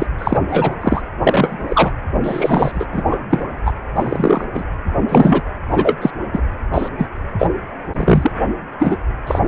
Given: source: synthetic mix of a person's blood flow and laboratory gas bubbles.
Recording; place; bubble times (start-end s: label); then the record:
Doppler ultrasound of blood flow; precordium
0.00-0.07 s: bubbles
0.18-0.40 s: bubbles
0.47-0.76 s: bubbles
0.81-1.02 s: bubbles
1.23-1.91 s: bubbles
2.24-2.85 s: bubbles
2.92-3.03 s: bubbles
3.08-3.25 s: bubbles
3.30-3.46 s: bubbles
3.65-3.73 s: bubbles
3.96-4.45 s: bubbles
4.54-4.64 s: bubbles
5.08-5.42 s: bubbles
5.73-5.96 s: bubbles
6.01-6.11 s: bubbles
6.33-6.41 s: bubbles
6.74-6.88 s: bubbles
6.98-7.06 s: bubbles
7.38-7.47 s: bubbles
7.94-8.31 s: bubbles
8.79-8.97 s: bubbles
9.26-9.39 s: bubbles
From the record:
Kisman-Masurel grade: 243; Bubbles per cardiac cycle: several, 3 to 8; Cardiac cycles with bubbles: 100%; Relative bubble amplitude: loud (0.450 to 0.775); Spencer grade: 3 (all of the cardiac periods contain showers or single bubble signals, but not dominating or overriding the cardiac motion signals); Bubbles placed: anywhere in the cardiac cycle